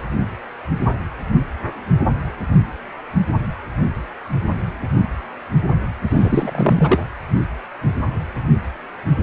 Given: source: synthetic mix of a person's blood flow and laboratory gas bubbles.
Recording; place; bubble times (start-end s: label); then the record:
Doppler ultrasound of blood flow; precordium
6.10-7.04 s: bubbles
From the record:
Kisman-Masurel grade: 213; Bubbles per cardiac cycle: several, 3 to 8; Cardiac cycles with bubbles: 1 to 10%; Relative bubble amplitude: loud (0.450 to 0.775); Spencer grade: 1 (occasional bubble signal discernible with the cardiac motion signal, with majority of cardiac periods free of bubbles); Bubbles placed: anywhere in the cardiac cycle